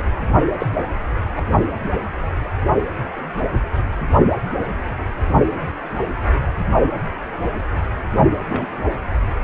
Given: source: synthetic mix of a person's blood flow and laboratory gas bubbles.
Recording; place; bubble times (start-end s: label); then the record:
Doppler ultrasound of blood flow; precordium
0.00-0.03 s: bubbles
0.59-0.66 s: bubbles
1.35-1.42 s: bubbles
8.49-8.66 s: bubbles
From the record:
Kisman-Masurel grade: 122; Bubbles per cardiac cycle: 1 to 2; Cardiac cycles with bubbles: 10 to 50%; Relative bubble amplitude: moderate (0.250 to 0.450); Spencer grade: 2 (many but less than half of the cardiac periods contain bubble signals, singularly or in groups); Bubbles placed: only in the low amplitude regions of the cardiac cycle